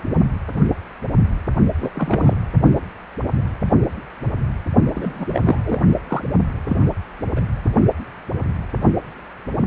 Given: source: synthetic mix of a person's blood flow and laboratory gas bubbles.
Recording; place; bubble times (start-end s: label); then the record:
Doppler ultrasound of blood flow; precordium
1.80-1.90 s: bubbles
1.95-2.35 s: bubbles
4.94-5.41 s: bubbles
5.46-5.60 s: bubbles
5.64-5.80 s: bubbles
6.07-6.23 s: bubbles
6.67-6.77 s: bubbles
7.35-7.40 s: bubbles
From the record:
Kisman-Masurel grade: 222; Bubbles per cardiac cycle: several, 3 to 8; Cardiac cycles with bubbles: 10 to 50%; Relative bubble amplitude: moderate (0.250 to 0.450); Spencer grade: 2 (many but less than half of the cardiac periods contain bubble signals, singularly or in groups); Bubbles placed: only in the low amplitude regions of the cardiac cycle